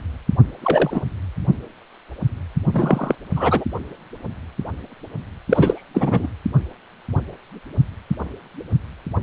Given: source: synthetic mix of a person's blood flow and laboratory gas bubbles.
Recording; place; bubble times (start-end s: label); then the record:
Doppler ultrasound of blood flow; precordium
0.62-1.02 s: bubbles
2.73-3.15 s: bubbles
3.36-3.65 s: bubbles
5.49-5.83 s: bubbles
5.94-6.27 s: bubbles
From the record:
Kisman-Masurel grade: 223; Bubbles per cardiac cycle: several, 3 to 8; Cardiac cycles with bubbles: 10 to 50%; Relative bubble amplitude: loud (0.450 to 0.775); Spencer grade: 2 (many but less than half of the cardiac periods contain bubble signals, singularly or in groups); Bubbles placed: only in the low amplitude regions of the cardiac cycle